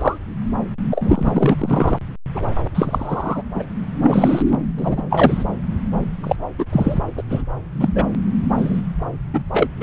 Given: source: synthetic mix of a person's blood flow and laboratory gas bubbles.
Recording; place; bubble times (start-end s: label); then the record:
Doppler ultrasound of blood flow; subclavian vein
0.00-0.18 s: bubbles
0.91-1.55 s: bubbles
1.58-1.98 s: bubbles
2.35-2.47 s: bubbles
2.75-3.43 s: bubbles
3.54-3.65 s: bubbles
4.04-4.42 s: bubbles
4.76-5.02 s: bubbles
5.09-5.43 s: bubbles
6.23-6.35 s: bubbles
6.58-6.66 s: bubbles
6.72-7.00 s: bubbles
7.17-7.22 s: bubbles
7.30-7.42 s: bubbles
7.79-7.89 s: bubbles
7.95-8.04 s: bubbles
8.58-8.81 s: bubbles
9.33-9.43 s: bubbles
9.53-9.69 s: bubbles
9.80-9.83 s: bubbles
From the record:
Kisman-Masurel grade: 243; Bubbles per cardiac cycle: several, 3 to 8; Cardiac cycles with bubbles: 100%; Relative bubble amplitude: loud (0.450 to 0.775); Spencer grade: 3 (all of the cardiac periods contain showers or single bubble signals, but not dominating or overriding the cardiac motion signals); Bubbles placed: anywhere in the cardiac cycle